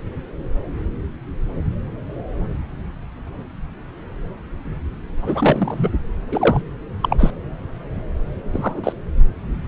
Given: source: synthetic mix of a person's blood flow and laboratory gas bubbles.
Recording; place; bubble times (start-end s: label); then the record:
Doppler ultrasound of blood flow; subclavian vein
5.22-5.90 s: bubbles
6.31-6.62 s: bubbles
7.02-7.32 s: bubbles
8.52-8.92 s: bubbles
From the record:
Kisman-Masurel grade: 223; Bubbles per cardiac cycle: several, 3 to 8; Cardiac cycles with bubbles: 10 to 50%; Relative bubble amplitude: loud (0.450 to 0.775); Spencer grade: 2 (many but less than half of the cardiac periods contain bubble signals, singularly or in groups); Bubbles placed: anywhere in the cardiac cycle